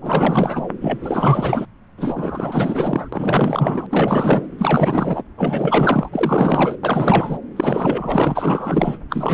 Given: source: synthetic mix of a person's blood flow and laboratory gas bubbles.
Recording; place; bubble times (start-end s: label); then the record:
Doppler ultrasound of blood flow; subclavian vein
0.02-0.69 s: bubbles
0.81-1.66 s: bubbles
1.97-3.08 s: bubbles
3.12-3.87 s: bubbles
3.91-4.49 s: bubbles
4.58-5.23 s: bubbles
5.38-6.09 s: bubbles
6.12-6.77 s: bubbles
6.83-7.39 s: bubbles
7.56-8.98 s: bubbles
9.09-9.33 s: bubbles
From the record:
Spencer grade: 4 (maximum detectable bubble signal sounding continuously throughout systole and diastole of every cardiac period, and overriding the amplitude of the normal cardiac signals); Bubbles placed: anywhere in the cardiac cycle